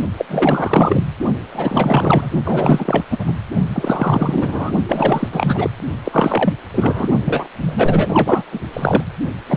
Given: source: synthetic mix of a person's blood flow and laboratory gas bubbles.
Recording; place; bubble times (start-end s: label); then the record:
Doppler ultrasound of blood flow; precordium
0.17-0.26 s: bubbles
0.28-1.04 s: bubbles
1.53-2.30 s: bubbles
2.45-3.04 s: bubbles
3.10-3.37 s: bubbles
3.72-4.72 s: bubbles
4.88-5.29 s: bubbles
5.32-5.70 s: bubbles
6.04-6.54 s: bubbles
6.74-7.08 s: bubbles
7.25-7.48 s: bubbles
7.61-8.43 s: bubbles
8.52-8.60 s: bubbles
8.73-9.04 s: bubbles
9.46-9.57 s: bubbles
From the record:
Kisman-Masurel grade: 444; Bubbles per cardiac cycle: continuous sound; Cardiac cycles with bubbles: 100%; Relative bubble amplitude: maximal (0.775 to 0.999); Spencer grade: 4 (maximum detectable bubble signal sounding continuously throughout systole and diastole of every cardiac period, and overriding the amplitude of the normal cardiac signals); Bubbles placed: only in the low amplitude regions of the cardiac cycle